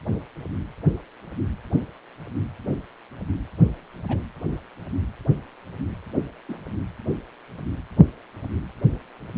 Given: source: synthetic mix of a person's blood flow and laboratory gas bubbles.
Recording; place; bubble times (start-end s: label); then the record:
Doppler ultrasound of blood flow; precordium
4.08-4.23 s: bubbles
6.49-6.61 s: bubbles
From the record:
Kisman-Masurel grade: 121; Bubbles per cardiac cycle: 1 to 2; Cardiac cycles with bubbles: 10 to 50%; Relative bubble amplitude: barely perceptible (0.100 to 0.250); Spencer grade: 2 (many but less than half of the cardiac periods contain bubble signals, singularly or in groups); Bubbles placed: anywhere in the cardiac cycle